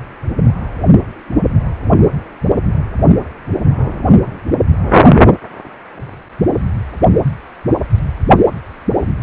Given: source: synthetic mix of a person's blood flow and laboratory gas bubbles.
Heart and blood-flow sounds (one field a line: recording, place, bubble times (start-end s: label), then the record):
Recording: Doppler ultrasound of blood flow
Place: precordium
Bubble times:
no bubbles
From the record:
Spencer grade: 0 (complete lack of bubble signals)